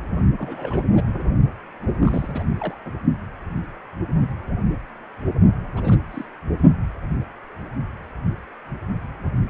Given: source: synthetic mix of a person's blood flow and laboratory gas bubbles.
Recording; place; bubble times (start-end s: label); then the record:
Doppler ultrasound of blood flow; precordium
0.39-0.83 s: bubbles
0.94-1.24 s: bubbles
1.99-2.77 s: bubbles
2.85-2.92 s: bubbles
5.73-5.98 s: bubbles
6.12-6.26 s: bubbles
From the record:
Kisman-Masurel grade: 221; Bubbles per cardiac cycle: several, 3 to 8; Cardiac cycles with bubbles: 10 to 50%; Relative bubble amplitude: barely perceptible (0.100 to 0.250); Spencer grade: 2 (many but less than half of the cardiac periods contain bubble signals, singularly or in groups); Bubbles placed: only in the low amplitude regions of the cardiac cycle